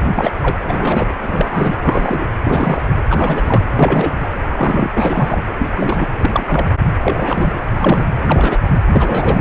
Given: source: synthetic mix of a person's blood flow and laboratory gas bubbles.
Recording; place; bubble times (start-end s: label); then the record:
Doppler ultrasound of blood flow; precordium
0.00-0.12 s: bubbles
0.15-0.32 s: bubbles
0.42-0.58 s: bubbles
0.62-1.09 s: bubbles
1.22-2.32 s: bubbles
2.44-2.82 s: bubbles
3.08-3.62 s: bubbles
3.75-4.16 s: bubbles
4.23-4.28 s: bubbles
4.49-5.42 s: bubbles
5.58-5.69 s: bubbles
5.74-6.06 s: bubbles
6.19-6.67 s: bubbles
7.02-7.61 s: bubbles
7.76-8.10 s: bubbles
8.22-8.59 s: bubbles
8.88-9.41 s: bubbles
From the record:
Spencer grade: 3 (all of the cardiac periods contain showers or single bubble signals, but not dominating or overriding the cardiac motion signals); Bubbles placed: anywhere in the cardiac cycle